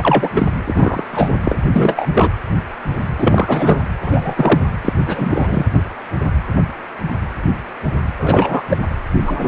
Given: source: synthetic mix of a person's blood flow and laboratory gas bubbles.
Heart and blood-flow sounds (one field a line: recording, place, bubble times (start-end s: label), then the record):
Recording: Doppler ultrasound of blood flow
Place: precordium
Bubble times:
0.00-0.30 s: bubbles
0.33-0.47 s: bubbles
0.64-1.04 s: bubbles
1.12-1.29 s: bubbles
1.44-1.58 s: bubbles
1.73-2.08 s: bubbles
2.15-2.30 s: bubbles
3.18-3.79 s: bubbles
4.02-4.60 s: bubbles
4.81-4.93 s: bubbles
5.06-5.66 s: bubbles
8.22-8.62 s: bubbles
8.70-8.78 s: bubbles
9.21-9.48 s: bubbles
From the record:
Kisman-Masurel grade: 233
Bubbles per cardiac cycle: several, 3 to 8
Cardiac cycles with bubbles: 50 to 99%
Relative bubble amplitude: loud (0.450 to 0.775)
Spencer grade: 3 (all of the cardiac periods contain showers or single bubble signals, but not dominating or overriding the cardiac motion signals)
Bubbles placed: anywhere in the cardiac cycle